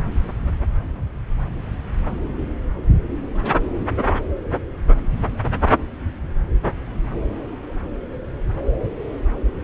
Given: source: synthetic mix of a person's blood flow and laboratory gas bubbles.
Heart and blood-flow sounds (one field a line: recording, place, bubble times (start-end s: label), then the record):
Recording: Doppler ultrasound of blood flow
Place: subclavian vein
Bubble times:
no bubbles
From the record:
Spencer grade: 0 (complete lack of bubble signals)